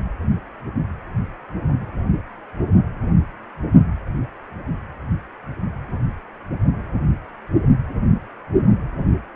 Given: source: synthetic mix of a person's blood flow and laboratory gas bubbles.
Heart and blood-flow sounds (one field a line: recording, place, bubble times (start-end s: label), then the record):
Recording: Doppler ultrasound of blood flow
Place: precordium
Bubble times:
no bubbles
From the record:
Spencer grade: 0 (complete lack of bubble signals)